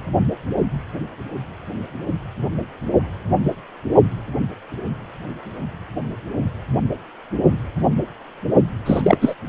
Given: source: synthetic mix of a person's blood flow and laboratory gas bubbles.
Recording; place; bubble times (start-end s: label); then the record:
Doppler ultrasound of blood flow; precordium
8.86-9.18 s: bubbles
9.21-9.34 s: bubbles
From the record:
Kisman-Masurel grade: 223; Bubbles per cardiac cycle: several, 3 to 8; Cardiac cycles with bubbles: 10 to 50%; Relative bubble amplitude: loud (0.450 to 0.775); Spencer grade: 2 (many but less than half of the cardiac periods contain bubble signals, singularly or in groups); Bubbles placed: only in the low amplitude regions of the cardiac cycle